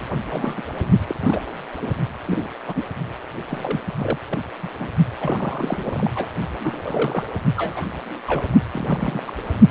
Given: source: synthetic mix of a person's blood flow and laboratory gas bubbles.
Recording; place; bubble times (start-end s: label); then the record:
Doppler ultrasound of blood flow; precordium
0.00-0.02 s: bubbles
0.30-0.61 s: bubbles
1.07-1.15 s: bubbles
1.21-1.40 s: bubbles
1.82-1.91 s: bubbles
2.25-2.48 s: bubbles
2.67-2.85 s: bubbles
3.49-3.81 s: bubbles
3.99-4.19 s: bubbles
4.29-4.39 s: bubbles
4.63-4.68 s: bubbles
4.79-4.88 s: bubbles
5.21-6.11 s: bubbles
6.15-6.29 s: bubbles
6.60-7.25 s: bubbles
7.57-7.86 s: bubbles
8.26-8.46 s: bubbles
8.72-9.21 s: bubbles
9.26-9.32 s: bubbles
From the record:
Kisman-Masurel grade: 242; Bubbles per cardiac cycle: several, 3 to 8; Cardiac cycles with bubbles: 100%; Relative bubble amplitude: moderate (0.250 to 0.450); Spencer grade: 3 (all of the cardiac periods contain showers or single bubble signals, but not dominating or overriding the cardiac motion signals); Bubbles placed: only in the low amplitude regions of the cardiac cycle